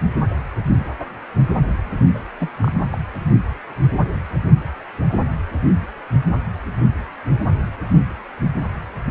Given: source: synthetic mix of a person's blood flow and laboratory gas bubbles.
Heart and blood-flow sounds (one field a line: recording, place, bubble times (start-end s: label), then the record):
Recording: Doppler ultrasound of blood flow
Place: precordium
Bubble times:
2.14-2.19 s: bubbles
2.40-2.48 s: bubbles
2.61-2.98 s: bubbles
From the record:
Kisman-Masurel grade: 212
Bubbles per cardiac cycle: several, 3 to 8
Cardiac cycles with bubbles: 1 to 10%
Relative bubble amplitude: moderate (0.250 to 0.450)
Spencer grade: 1 (occasional bubble signal discernible with the cardiac motion signal, with majority of cardiac periods free of bubbles)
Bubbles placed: only in the low amplitude regions of the cardiac cycle